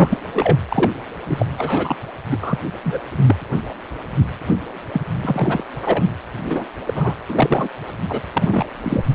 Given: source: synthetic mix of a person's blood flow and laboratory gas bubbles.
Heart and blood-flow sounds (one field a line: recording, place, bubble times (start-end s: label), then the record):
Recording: Doppler ultrasound of blood flow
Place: precordium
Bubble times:
0.00-0.18 s: bubbles
0.34-0.56 s: bubbles
0.69-0.92 s: bubbles
1.27-1.46 s: bubbles
1.58-1.96 s: bubbles
2.30-2.38 s: bubbles
2.42-2.59 s: bubbles
2.83-2.98 s: bubbles
3.26-3.35 s: bubbles
4.92-5.01 s: bubbles
5.21-5.63 s: bubbles
5.82-6.04 s: bubbles
6.44-6.66 s: bubbles
6.87-7.14 s: bubbles
7.29-7.68 s: bubbles
7.86-7.91 s: bubbles
8.09-8.21 s: bubbles
8.33-8.66 s: bubbles
8.83-9.03 s: bubbles
From the record:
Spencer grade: 3 (all of the cardiac periods contain showers or single bubble signals, but not dominating or overriding the cardiac motion signals)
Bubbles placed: anywhere in the cardiac cycle